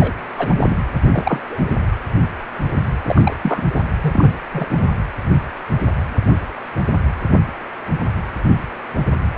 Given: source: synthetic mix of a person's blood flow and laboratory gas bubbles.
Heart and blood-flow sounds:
Doppler ultrasound of blood flow; precordium
0.00-0.12 s: bubbles
0.38-0.79 s: bubbles
1.11-1.40 s: bubbles
1.50-1.73 s: bubbles
3.03-3.37 s: bubbles
3.42-3.62 s: bubbles
3.74-3.81 s: bubbles
4.01-4.32 s: bubbles
4.54-4.67 s: bubbles
4.71-4.84 s: bubbles
9.34-9.38 s: bubbles
From the record:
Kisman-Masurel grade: 222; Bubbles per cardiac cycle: several, 3 to 8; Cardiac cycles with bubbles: 10 to 50%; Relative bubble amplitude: moderate (0.250 to 0.450); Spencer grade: 2 (many but less than half of the cardiac periods contain bubble signals, singularly or in groups); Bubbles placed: anywhere in the cardiac cycle

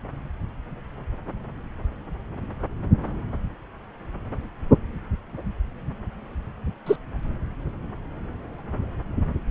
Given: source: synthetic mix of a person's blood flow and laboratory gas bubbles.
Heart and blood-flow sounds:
Doppler ultrasound of blood flow; subclavian vein
6.86-6.96 s: bubbles
From the record:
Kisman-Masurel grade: 122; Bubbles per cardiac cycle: 1 to 2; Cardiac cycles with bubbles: 10 to 50%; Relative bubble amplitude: moderate (0.250 to 0.450); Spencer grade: 2 (many but less than half of the cardiac periods contain bubble signals, singularly or in groups); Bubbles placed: anywhere in the cardiac cycle

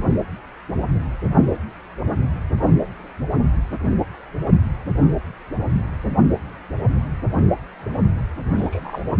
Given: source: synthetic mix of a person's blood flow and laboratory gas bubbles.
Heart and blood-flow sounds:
Doppler ultrasound of blood flow; precordium
8.56-9.03 s: bubbles
From the record:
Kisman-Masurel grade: 111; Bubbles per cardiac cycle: 1 to 2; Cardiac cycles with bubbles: 1 to 10%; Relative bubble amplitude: barely perceptible (0.100 to 0.250); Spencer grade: 1 (occasional bubble signal discernible with the cardiac motion signal, with majority of cardiac periods free of bubbles); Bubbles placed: only in the low amplitude regions of the cardiac cycle

